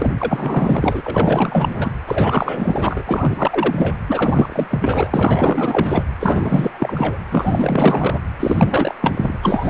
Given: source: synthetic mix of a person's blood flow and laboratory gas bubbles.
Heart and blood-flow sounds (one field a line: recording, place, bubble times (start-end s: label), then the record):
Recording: Doppler ultrasound of blood flow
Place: precordium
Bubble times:
0.00-0.12 s: bubbles
0.20-1.91 s: bubbles
2.07-3.03 s: bubbles
3.07-3.96 s: bubbles
4.08-6.04 s: bubbles
6.20-7.18 s: bubbles
7.32-8.19 s: bubbles
8.39-8.95 s: bubbles
9.02-9.38 s: bubbles
9.42-9.70 s: bubbles
From the record:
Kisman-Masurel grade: 444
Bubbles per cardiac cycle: continuous sound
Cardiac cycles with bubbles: 100%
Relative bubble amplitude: maximal (0.775 to 0.999)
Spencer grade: 4 (maximum detectable bubble signal sounding continuously throughout systole and diastole of every cardiac period, and overriding the amplitude of the normal cardiac signals)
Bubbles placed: anywhere in the cardiac cycle